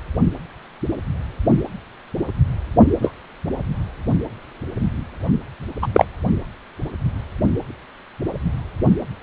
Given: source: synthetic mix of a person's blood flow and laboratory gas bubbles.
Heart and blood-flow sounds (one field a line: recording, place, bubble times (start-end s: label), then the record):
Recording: Doppler ultrasound of blood flow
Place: precordium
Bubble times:
3.02-3.12 s: bubbles
5.82-5.87 s: bubbles
5.94-6.05 s: bubbles
From the record:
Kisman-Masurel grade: 123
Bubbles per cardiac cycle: 1 to 2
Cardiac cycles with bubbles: 10 to 50%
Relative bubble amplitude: loud (0.450 to 0.775)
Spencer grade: 2 (many but less than half of the cardiac periods contain bubble signals, singularly or in groups)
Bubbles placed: only in the low amplitude regions of the cardiac cycle